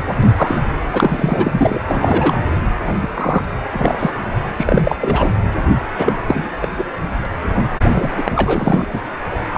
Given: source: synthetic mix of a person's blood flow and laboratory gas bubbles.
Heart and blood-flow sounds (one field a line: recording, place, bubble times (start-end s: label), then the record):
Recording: Doppler ultrasound of blood flow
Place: precordium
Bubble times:
0.00-0.03 s: bubbles
0.22-0.59 s: bubbles
0.92-1.81 s: bubbles
1.88-2.40 s: bubbles
2.80-2.96 s: bubbles
3.01-3.08 s: bubbles
3.14-3.46 s: bubbles
3.71-4.11 s: bubbles
4.59-4.82 s: bubbles
4.85-4.96 s: bubbles
5.00-5.29 s: bubbles
5.98-6.12 s: bubbles
6.27-6.49 s: bubbles
6.62-6.68 s: bubbles
6.77-6.85 s: bubbles
7.25-7.29 s: bubbles
7.49-7.66 s: bubbles
7.91-8.11 s: bubbles
8.16-8.87 s: bubbles
8.92-8.99 s: bubbles
9.53-9.58 s: bubbles
From the record:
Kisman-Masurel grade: 243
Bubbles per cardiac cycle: several, 3 to 8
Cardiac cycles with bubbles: 100%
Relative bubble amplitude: loud (0.450 to 0.775)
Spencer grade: 3 (all of the cardiac periods contain showers or single bubble signals, but not dominating or overriding the cardiac motion signals)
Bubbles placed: anywhere in the cardiac cycle